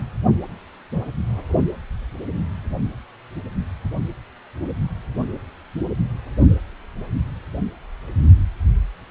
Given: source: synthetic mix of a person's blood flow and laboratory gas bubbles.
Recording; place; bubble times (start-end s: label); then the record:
Doppler ultrasound of blood flow; precordium
no bubbles
From the record:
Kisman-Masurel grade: 000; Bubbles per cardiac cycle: 0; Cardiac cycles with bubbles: 0%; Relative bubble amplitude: no bubbles discernible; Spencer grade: 0 (complete lack of bubble signals)